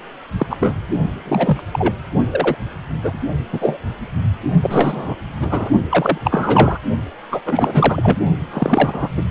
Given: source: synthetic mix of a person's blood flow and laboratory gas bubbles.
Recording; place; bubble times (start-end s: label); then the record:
Doppler ultrasound of blood flow; precordium
0.38-0.46 s: bubbles
0.50-0.57 s: bubbles
0.60-0.76 s: bubbles
1.25-1.62 s: bubbles
1.72-1.93 s: bubbles
2.31-2.56 s: bubbles
3.01-3.19 s: bubbles
3.53-3.77 s: bubbles
4.62-5.15 s: bubbles
5.40-5.69 s: bubbles
5.89-6.18 s: bubbles
6.23-6.79 s: bubbles
7.31-7.39 s: bubbles
7.45-8.17 s: bubbles
8.53-9.08 s: bubbles
9.17-9.23 s: bubbles
From the record:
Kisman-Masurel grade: 243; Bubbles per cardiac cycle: several, 3 to 8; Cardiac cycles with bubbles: 100%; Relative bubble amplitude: loud (0.450 to 0.775); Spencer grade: 3 (all of the cardiac periods contain showers or single bubble signals, but not dominating or overriding the cardiac motion signals); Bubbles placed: only in the low amplitude regions of the cardiac cycle